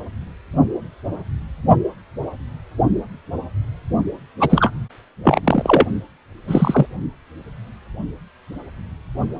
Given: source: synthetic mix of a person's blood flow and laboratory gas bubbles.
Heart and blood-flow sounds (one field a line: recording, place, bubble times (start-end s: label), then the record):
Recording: Doppler ultrasound of blood flow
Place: precordium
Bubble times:
4.40-4.71 s: bubbles
5.23-5.40 s: bubbles
5.44-5.85 s: bubbles
6.47-6.86 s: bubbles
From the record:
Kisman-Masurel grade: 223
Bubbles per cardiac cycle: several, 3 to 8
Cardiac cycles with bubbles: 10 to 50%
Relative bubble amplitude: loud (0.450 to 0.775)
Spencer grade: 2 (many but less than half of the cardiac periods contain bubble signals, singularly or in groups)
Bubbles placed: only in the low amplitude regions of the cardiac cycle